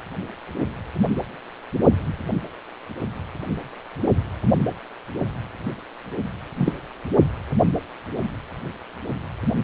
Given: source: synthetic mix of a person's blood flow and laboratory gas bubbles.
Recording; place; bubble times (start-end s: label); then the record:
Doppler ultrasound of blood flow; precordium
6.58-6.73 s: bubbles
From the record:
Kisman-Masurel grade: 112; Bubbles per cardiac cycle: 1 to 2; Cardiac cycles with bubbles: 1 to 10%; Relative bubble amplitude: moderate (0.250 to 0.450); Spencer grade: 1 (occasional bubble signal discernible with the cardiac motion signal, with majority of cardiac periods free of bubbles); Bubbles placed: only in the low amplitude regions of the cardiac cycle